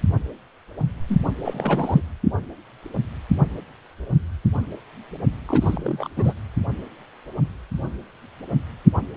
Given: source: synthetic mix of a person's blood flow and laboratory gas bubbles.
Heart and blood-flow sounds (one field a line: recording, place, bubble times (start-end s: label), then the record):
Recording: Doppler ultrasound of blood flow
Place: precordium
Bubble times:
1.08-1.19 s: bubbles
1.44-2.02 s: bubbles
5.46-6.08 s: bubbles
6.17-6.33 s: bubbles
From the record:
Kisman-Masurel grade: 222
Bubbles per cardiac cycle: several, 3 to 8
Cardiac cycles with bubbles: 10 to 50%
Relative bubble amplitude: moderate (0.250 to 0.450)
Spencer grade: 2 (many but less than half of the cardiac periods contain bubble signals, singularly or in groups)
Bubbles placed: anywhere in the cardiac cycle